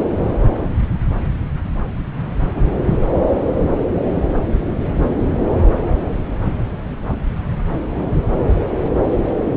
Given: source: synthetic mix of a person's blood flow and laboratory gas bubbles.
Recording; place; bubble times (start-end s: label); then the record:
Doppler ultrasound of blood flow; subclavian vein
2.56-2.62 s: bubbles
2.84-2.97 s: bubbles
From the record:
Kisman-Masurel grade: 112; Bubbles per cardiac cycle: 1 to 2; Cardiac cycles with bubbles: 1 to 10%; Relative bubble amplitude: moderate (0.250 to 0.450); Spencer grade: 1 (occasional bubble signal discernible with the cardiac motion signal, with majority of cardiac periods free of bubbles); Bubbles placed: anywhere in the cardiac cycle